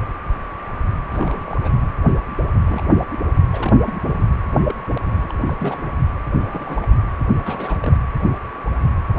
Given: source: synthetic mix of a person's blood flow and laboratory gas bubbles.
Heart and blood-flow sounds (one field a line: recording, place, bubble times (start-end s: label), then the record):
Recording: Doppler ultrasound of blood flow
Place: precordium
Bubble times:
1.10-1.58 s: bubbles
1.62-1.85 s: bubbles
2.68-2.83 s: bubbles
3.10-3.19 s: bubbles
3.33-3.41 s: bubbles
3.52-3.75 s: bubbles
3.85-3.95 s: bubbles
4.04-4.26 s: bubbles
4.67-4.74 s: bubbles
4.88-5.26 s: bubbles
5.29-5.32 s: bubbles
5.45-5.53 s: bubbles
5.58-5.92 s: bubbles
6.38-6.85 s: bubbles
7.44-7.78 s: bubbles
7.81-7.96 s: bubbles
9.10-9.19 s: bubbles
From the record:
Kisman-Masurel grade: 221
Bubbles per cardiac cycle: several, 3 to 8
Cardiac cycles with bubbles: 10 to 50%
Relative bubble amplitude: barely perceptible (0.100 to 0.250)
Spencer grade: 2 (many but less than half of the cardiac periods contain bubble signals, singularly or in groups)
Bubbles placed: anywhere in the cardiac cycle